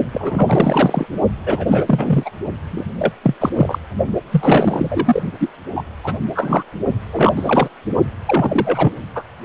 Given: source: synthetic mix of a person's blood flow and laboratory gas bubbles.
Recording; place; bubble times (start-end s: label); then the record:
Doppler ultrasound of blood flow; precordium
0.12-1.06 s: bubbles
1.46-2.30 s: bubbles
2.71-2.84 s: bubbles
2.98-3.12 s: bubbles
3.23-3.35 s: bubbles
3.41-3.50 s: bubbles
3.57-3.79 s: bubbles
4.30-5.22 s: bubbles
5.40-5.49 s: bubbles
5.75-5.82 s: bubbles
6.03-6.14 s: bubbles
6.34-6.62 s: bubbles
7.12-7.33 s: bubbles
7.35-7.68 s: bubbles
8.27-8.93 s: bubbles
9.15-9.25 s: bubbles
From the record:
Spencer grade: 3 (all of the cardiac periods contain showers or single bubble signals, but not dominating or overriding the cardiac motion signals); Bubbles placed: only in the low amplitude regions of the cardiac cycle